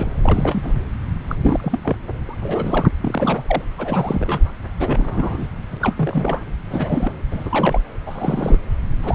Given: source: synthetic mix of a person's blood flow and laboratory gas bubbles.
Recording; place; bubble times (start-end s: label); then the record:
Doppler ultrasound of blood flow; subclavian vein
0.00-0.75 s: bubbles
1.28-1.35 s: bubbles
1.43-1.79 s: bubbles
1.83-1.96 s: bubbles
2.29-2.35 s: bubbles
2.41-2.89 s: bubbles
3.02-3.62 s: bubbles
3.78-4.51 s: bubbles
4.79-5.46 s: bubbles
5.71-5.77 s: bubbles
5.81-6.43 s: bubbles
6.70-7.12 s: bubbles
7.30-7.80 s: bubbles
8.06-8.58 s: bubbles
9.03-9.15 s: bubbles
From the record:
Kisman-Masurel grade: 342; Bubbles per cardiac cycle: rolling drumbeat, 9 or more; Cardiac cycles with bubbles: 100%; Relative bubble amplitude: moderate (0.250 to 0.450); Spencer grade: 3 (all of the cardiac periods contain showers or single bubble signals, but not dominating or overriding the cardiac motion signals); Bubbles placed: anywhere in the cardiac cycle